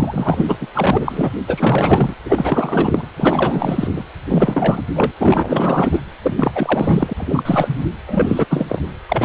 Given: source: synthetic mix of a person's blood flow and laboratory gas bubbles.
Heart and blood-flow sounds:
Doppler ultrasound of blood flow; precordium
0.00-0.57 s: bubbles
0.60-0.67 s: bubbles
0.75-1.30 s: bubbles
1.47-2.14 s: bubbles
2.25-3.07 s: bubbles
3.17-4.03 s: bubbles
4.29-4.83 s: bubbles
4.94-5.12 s: bubbles
5.19-6.00 s: bubbles
6.23-6.52 s: bubbles
6.54-7.13 s: bubbles
7.17-7.83 s: bubbles
8.07-8.46 s: bubbles
8.49-8.65 s: bubbles
8.69-8.81 s: bubbles
9.08-9.25 s: bubbles
From the record:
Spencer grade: 4 (maximum detectable bubble signal sounding continuously throughout systole and diastole of every cardiac period, and overriding the amplitude of the normal cardiac signals); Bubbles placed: anywhere in the cardiac cycle

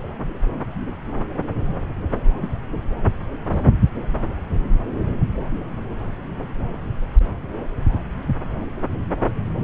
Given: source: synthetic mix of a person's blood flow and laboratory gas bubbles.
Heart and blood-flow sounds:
Doppler ultrasound of blood flow; subclavian vein
3.52-3.61 s: bubbles
From the record:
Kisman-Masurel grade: 112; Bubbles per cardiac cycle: 1 to 2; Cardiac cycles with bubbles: 1 to 10%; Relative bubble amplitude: moderate (0.250 to 0.450); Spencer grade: 1 (occasional bubble signal discernible with the cardiac motion signal, with majority of cardiac periods free of bubbles); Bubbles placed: anywhere in the cardiac cycle

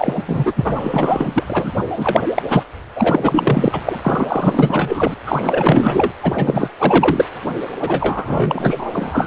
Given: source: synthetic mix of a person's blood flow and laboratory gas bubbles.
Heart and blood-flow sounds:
Doppler ultrasound of blood flow; precordium
0.00-0.24 s: bubbles
0.27-1.44 s: bubbles
1.49-1.72 s: bubbles
1.95-2.23 s: bubbles
2.35-2.42 s: bubbles
2.49-2.63 s: bubbles
2.96-3.81 s: bubbles
3.85-3.99 s: bubbles
4.02-5.14 s: bubbles
5.26-6.12 s: bubbles
6.23-6.70 s: bubbles
6.79-7.25 s: bubbles
7.81-9.27 s: bubbles
From the record:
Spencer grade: 4 (maximum detectable bubble signal sounding continuously throughout systole and diastole of every cardiac period, and overriding the amplitude of the normal cardiac signals); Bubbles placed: anywhere in the cardiac cycle

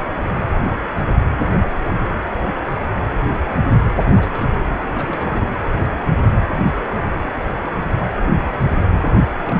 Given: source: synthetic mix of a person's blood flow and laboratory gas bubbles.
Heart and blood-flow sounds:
Doppler ultrasound of blood flow; precordium
3.95-4.14 s: bubbles
4.17-4.55 s: bubbles
4.85-5.57 s: bubbles
9.44-9.60 s: bubbles
From the record:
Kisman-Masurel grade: 221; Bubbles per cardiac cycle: several, 3 to 8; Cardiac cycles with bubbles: 10 to 50%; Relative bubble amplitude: barely perceptible (0.100 to 0.250); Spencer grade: 2 (many but less than half of the cardiac periods contain bubble signals, singularly or in groups); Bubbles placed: anywhere in the cardiac cycle

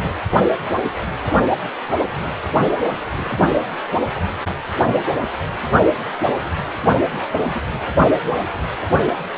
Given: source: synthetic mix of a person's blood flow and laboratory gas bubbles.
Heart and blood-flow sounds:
Doppler ultrasound of blood flow; precordium
3.11-3.46 s: bubbles
5.11-5.25 s: bubbles
6.18-6.43 s: bubbles
7.53-7.62 s: bubbles
From the record:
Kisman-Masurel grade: 121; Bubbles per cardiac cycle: 1 to 2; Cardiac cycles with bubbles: 10 to 50%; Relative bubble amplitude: barely perceptible (0.100 to 0.250); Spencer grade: 2 (many but less than half of the cardiac periods contain bubble signals, singularly or in groups); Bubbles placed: anywhere in the cardiac cycle

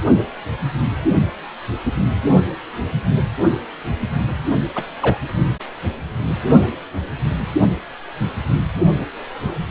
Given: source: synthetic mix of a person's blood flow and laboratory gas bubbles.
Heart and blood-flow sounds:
Doppler ultrasound of blood flow; precordium
4.75-4.84 s: bubbles
5.00-5.17 s: bubbles
From the record:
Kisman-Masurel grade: 112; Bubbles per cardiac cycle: 1 to 2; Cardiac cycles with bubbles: 1 to 10%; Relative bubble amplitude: moderate (0.250 to 0.450); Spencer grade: 1 (occasional bubble signal discernible with the cardiac motion signal, with majority of cardiac periods free of bubbles); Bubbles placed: only in the low amplitude regions of the cardiac cycle

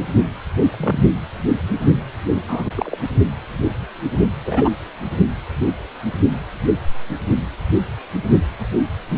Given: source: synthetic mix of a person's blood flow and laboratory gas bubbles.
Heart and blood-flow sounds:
Doppler ultrasound of blood flow; precordium
0.72-1.05 s: bubbles
2.48-2.64 s: bubbles
2.76-2.97 s: bubbles
4.46-4.69 s: bubbles
From the record:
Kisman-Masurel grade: 122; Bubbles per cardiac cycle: 1 to 2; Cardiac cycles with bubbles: 10 to 50%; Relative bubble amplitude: moderate (0.250 to 0.450); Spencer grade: 2 (many but less than half of the cardiac periods contain bubble signals, singularly or in groups); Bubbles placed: only in the low amplitude regions of the cardiac cycle

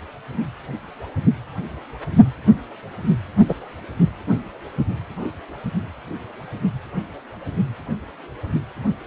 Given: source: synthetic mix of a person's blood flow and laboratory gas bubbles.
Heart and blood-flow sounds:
Doppler ultrasound of blood flow; precordium
3.48-3.55 s: bubbles
From the record:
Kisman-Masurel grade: 113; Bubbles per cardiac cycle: 1 to 2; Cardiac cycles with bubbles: 1 to 10%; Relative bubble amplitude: loud (0.450 to 0.775); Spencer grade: 1 (occasional bubble signal discernible with the cardiac motion signal, with majority of cardiac periods free of bubbles); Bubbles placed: only in the low amplitude regions of the cardiac cycle

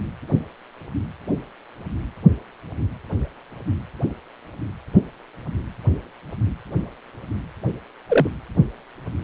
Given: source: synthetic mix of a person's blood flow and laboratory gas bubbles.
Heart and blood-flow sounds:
Doppler ultrasound of blood flow; precordium
8.08-8.28 s: bubbles
From the record:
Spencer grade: 1 (occasional bubble signal discernible with the cardiac motion signal, with majority of cardiac periods free of bubbles); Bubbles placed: anywhere in the cardiac cycle

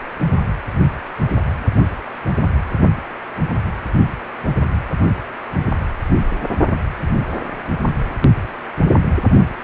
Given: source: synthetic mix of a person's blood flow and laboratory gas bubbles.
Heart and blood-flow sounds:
Doppler ultrasound of blood flow; precordium
no bubbles
From the record:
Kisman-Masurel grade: 000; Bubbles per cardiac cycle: 0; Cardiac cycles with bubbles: 0%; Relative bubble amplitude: no bubbles discernible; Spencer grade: 0 (complete lack of bubble signals)

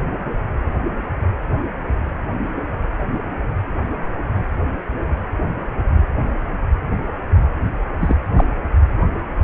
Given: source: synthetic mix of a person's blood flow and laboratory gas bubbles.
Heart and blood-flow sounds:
Doppler ultrasound of blood flow; precordium
8.01-8.15 s: bubbles
8.36-8.45 s: bubbles
From the record:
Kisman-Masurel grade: 113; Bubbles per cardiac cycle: 1 to 2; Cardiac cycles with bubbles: 1 to 10%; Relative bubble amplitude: loud (0.450 to 0.775); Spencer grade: 1 (occasional bubble signal discernible with the cardiac motion signal, with majority of cardiac periods free of bubbles); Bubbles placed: anywhere in the cardiac cycle

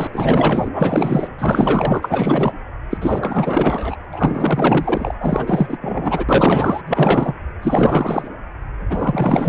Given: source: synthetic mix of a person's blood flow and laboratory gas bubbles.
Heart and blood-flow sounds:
Doppler ultrasound of blood flow; precordium
0.00-0.70 s: bubbles
0.72-1.28 s: bubbles
1.38-2.52 s: bubbles
2.90-2.98 s: bubbles
3.01-3.96 s: bubbles
4.12-5.14 s: bubbles
5.20-5.77 s: bubbles
5.80-6.25 s: bubbles
6.28-6.82 s: bubbles
6.87-7.33 s: bubbles
7.61-8.28 s: bubbles
8.89-9.49 s: bubbles
From the record:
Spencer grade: 4 (maximum detectable bubble signal sounding continuously throughout systole and diastole of every cardiac period, and overriding the amplitude of the normal cardiac signals); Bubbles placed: anywhere in the cardiac cycle

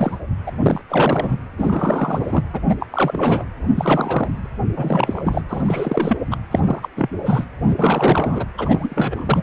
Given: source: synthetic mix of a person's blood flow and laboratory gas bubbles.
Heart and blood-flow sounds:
Doppler ultrasound of blood flow; precordium
0.00-0.18 s: bubbles
0.46-0.52 s: bubbles
0.61-0.82 s: bubbles
0.88-1.37 s: bubbles
1.58-2.44 s: bubbles
2.52-2.60 s: bubbles
2.69-2.75 s: bubbles
2.80-2.86 s: bubbles
2.90-3.44 s: bubbles
3.75-4.50 s: bubbles
4.75-5.42 s: bubbles
5.49-6.17 s: bubbles
6.31-6.37 s: bubbles
6.51-6.60 s: bubbles
6.64-6.88 s: bubbles
6.96-7.10 s: bubbles
7.25-7.46 s: bubbles
7.62-8.45 s: bubbles
8.58-9.42 s: bubbles
From the record:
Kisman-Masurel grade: 343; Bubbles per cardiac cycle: rolling drumbeat, 9 or more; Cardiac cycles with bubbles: 100%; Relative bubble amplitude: loud (0.450 to 0.775); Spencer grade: 3 (all of the cardiac periods contain showers or single bubble signals, but not dominating or overriding the cardiac motion signals); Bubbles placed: anywhere in the cardiac cycle

